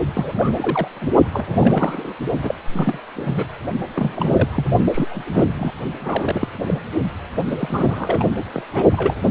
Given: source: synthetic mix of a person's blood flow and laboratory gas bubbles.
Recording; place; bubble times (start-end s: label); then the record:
Doppler ultrasound of blood flow; precordium
0.15-0.88 s: bubbles
1.01-1.11 s: bubbles
1.32-1.57 s: bubbles
1.60-2.13 s: bubbles
2.42-2.54 s: bubbles
2.73-2.98 s: bubbles
3.15-3.48 s: bubbles
3.94-4.49 s: bubbles
4.51-4.65 s: bubbles
4.91-5.45 s: bubbles
5.58-5.72 s: bubbles
6.00-6.48 s: bubbles
6.66-6.79 s: bubbles
7.46-8.25 s: bubbles
8.54-8.62 s: bubbles
8.73-8.84 s: bubbles
8.92-9.15 s: bubbles
9.24-9.31 s: bubbles
From the record:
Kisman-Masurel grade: 342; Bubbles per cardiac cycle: rolling drumbeat, 9 or more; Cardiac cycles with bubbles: 100%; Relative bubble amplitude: moderate (0.250 to 0.450); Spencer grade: 3 (all of the cardiac periods contain showers or single bubble signals, but not dominating or overriding the cardiac motion signals); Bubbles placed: only in the low amplitude regions of the cardiac cycle